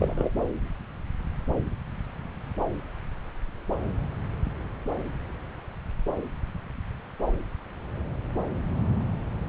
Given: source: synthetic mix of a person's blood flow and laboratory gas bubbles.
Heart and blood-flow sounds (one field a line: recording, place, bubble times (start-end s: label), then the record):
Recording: Doppler ultrasound of blood flow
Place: subclavian vein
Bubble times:
0.00-0.30 s: bubbles
From the record:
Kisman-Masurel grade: 123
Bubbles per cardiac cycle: 1 to 2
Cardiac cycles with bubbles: 10 to 50%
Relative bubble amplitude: loud (0.450 to 0.775)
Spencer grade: 2 (many but less than half of the cardiac periods contain bubble signals, singularly or in groups)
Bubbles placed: anywhere in the cardiac cycle